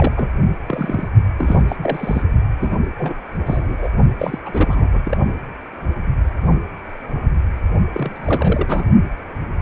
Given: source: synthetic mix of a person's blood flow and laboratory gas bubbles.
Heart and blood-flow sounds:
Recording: Doppler ultrasound of blood flow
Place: precordium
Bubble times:
0.00-0.14 s: bubbles
0.16-0.29 s: bubbles
0.67-1.08 s: bubbles
1.39-1.64 s: bubbles
1.68-1.76 s: bubbles
1.79-2.22 s: bubbles
2.60-2.77 s: bubbles
2.98-3.15 s: bubbles
3.46-3.90 s: bubbles
4.19-4.39 s: bubbles
4.46-5.18 s: bubbles
7.93-8.85 s: bubbles
From the record:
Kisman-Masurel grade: 332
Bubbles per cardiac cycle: rolling drumbeat, 9 or more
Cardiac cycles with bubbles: 50 to 99%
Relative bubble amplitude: moderate (0.250 to 0.450)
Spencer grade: 3 (all of the cardiac periods contain showers or single bubble signals, but not dominating or overriding the cardiac motion signals)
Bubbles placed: only in the low amplitude regions of the cardiac cycle

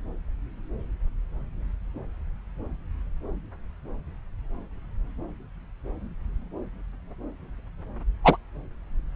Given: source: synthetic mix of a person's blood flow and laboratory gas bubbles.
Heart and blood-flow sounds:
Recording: Doppler ultrasound of blood flow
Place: subclavian vein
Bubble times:
8.24-8.37 s: bubbles
From the record:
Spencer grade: 1 (occasional bubble signal discernible with the cardiac motion signal, with majority of cardiac periods free of bubbles)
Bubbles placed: anywhere in the cardiac cycle

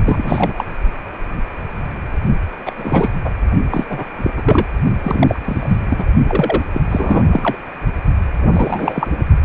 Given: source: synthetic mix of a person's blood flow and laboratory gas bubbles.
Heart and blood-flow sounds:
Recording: Doppler ultrasound of blood flow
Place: precordium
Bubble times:
0.06-0.55 s: bubbles
0.58-0.65 s: bubbles
2.66-2.72 s: bubbles
2.77-3.10 s: bubbles
3.24-3.30 s: bubbles
3.71-3.85 s: bubbles
3.89-4.04 s: bubbles
4.18-4.31 s: bubbles
4.37-4.66 s: bubbles
5.03-5.40 s: bubbles
5.45-5.82 s: bubbles
5.88-6.06 s: bubbles
6.27-6.62 s: bubbles
6.73-6.82 s: bubbles
6.90-7.58 s: bubbles
8.38-9.08 s: bubbles
From the record:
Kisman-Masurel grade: 332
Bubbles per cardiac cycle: rolling drumbeat, 9 or more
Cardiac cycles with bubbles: 50 to 99%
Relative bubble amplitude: moderate (0.250 to 0.450)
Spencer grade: 3 (all of the cardiac periods contain showers or single bubble signals, but not dominating or overriding the cardiac motion signals)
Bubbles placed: only in the low amplitude regions of the cardiac cycle

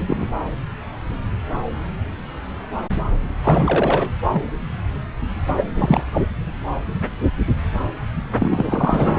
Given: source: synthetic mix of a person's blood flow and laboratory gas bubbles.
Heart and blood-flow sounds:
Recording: Doppler ultrasound of blood flow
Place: subclavian vein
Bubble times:
0.08-0.30 s: bubbles
3.44-4.12 s: bubbles
4.25-4.43 s: bubbles
5.57-5.64 s: bubbles
5.75-6.03 s: bubbles
6.12-6.27 s: bubbles
8.39-9.13 s: bubbles
From the record:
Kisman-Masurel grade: 233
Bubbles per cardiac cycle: several, 3 to 8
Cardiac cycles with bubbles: 50 to 99%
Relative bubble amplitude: loud (0.450 to 0.775)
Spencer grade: 3 (all of the cardiac periods contain showers or single bubble signals, but not dominating or overriding the cardiac motion signals)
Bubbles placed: anywhere in the cardiac cycle

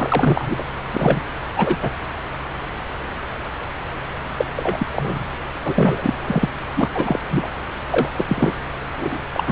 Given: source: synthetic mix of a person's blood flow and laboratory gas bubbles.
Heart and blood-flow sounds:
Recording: Doppler ultrasound of blood flow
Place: subclavian vein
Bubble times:
0.00-0.64 s: bubbles
0.92-1.22 s: bubbles
1.56-1.76 s: bubbles
1.82-1.91 s: bubbles
4.37-4.45 s: bubbles
4.56-4.86 s: bubbles
4.92-5.28 s: bubbles
5.64-6.13 s: bubbles
6.27-6.49 s: bubbles
6.75-6.89 s: bubbles
6.94-7.19 s: bubbles
7.31-7.49 s: bubbles
7.90-8.09 s: bubbles
8.17-8.53 s: bubbles
8.99-9.17 s: bubbles
9.33-9.43 s: bubbles
9.47-9.52 s: bubbles
From the record:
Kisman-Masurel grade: 233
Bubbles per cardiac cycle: several, 3 to 8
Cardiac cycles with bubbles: 50 to 99%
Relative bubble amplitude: loud (0.450 to 0.775)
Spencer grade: 3 (all of the cardiac periods contain showers or single bubble signals, but not dominating or overriding the cardiac motion signals)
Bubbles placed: anywhere in the cardiac cycle

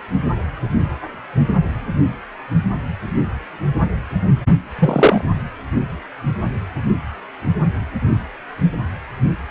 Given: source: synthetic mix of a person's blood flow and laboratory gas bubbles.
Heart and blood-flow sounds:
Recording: Doppler ultrasound of blood flow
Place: precordium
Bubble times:
4.79-5.21 s: bubbles
From the record:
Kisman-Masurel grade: 113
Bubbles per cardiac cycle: 1 to 2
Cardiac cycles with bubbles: 1 to 10%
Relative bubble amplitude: loud (0.450 to 0.775)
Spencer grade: 1 (occasional bubble signal discernible with the cardiac motion signal, with majority of cardiac periods free of bubbles)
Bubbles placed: only in the low amplitude regions of the cardiac cycle

